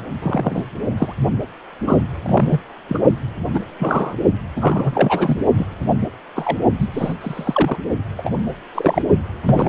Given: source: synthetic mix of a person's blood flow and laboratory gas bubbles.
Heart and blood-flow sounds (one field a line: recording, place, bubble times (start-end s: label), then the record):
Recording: Doppler ultrasound of blood flow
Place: precordium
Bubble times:
0.00-0.02 s: bubbles
0.22-0.64 s: bubbles
0.97-1.14 s: bubbles
1.87-1.98 s: bubbles
2.23-2.60 s: bubbles
2.88-2.98 s: bubbles
3.53-3.60 s: bubbles
3.79-4.15 s: bubbles
4.56-5.38 s: bubbles
5.57-5.66 s: bubbles
6.36-6.58 s: bubbles
6.79-6.87 s: bubbles
6.92-7.14 s: bubbles
7.20-7.77 s: bubbles
8.17-8.33 s: bubbles
8.74-9.02 s: bubbles
9.45-9.69 s: bubbles
From the record:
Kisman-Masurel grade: 232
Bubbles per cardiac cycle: several, 3 to 8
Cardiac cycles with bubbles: 50 to 99%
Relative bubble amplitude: moderate (0.250 to 0.450)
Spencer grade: 3 (all of the cardiac periods contain showers or single bubble signals, but not dominating or overriding the cardiac motion signals)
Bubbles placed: only in the low amplitude regions of the cardiac cycle